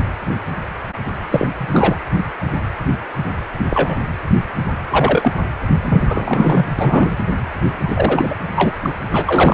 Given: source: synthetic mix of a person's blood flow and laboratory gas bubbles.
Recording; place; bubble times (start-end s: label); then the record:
Doppler ultrasound of blood flow; precordium
1.30-1.48 s: bubbles
1.57-1.96 s: bubbles
3.59-3.66 s: bubbles
3.70-3.99 s: bubbles
4.90-5.40 s: bubbles
5.82-6.03 s: bubbles
6.08-6.66 s: bubbles
6.79-7.17 s: bubbles
7.88-8.36 s: bubbles
8.51-8.73 s: bubbles
8.82-8.91 s: bubbles
9.10-9.54 s: bubbles
From the record:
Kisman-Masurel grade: 223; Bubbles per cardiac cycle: several, 3 to 8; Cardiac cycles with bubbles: 10 to 50%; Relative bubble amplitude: loud (0.450 to 0.775); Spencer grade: 2 (many but less than half of the cardiac periods contain bubble signals, singularly or in groups); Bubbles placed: anywhere in the cardiac cycle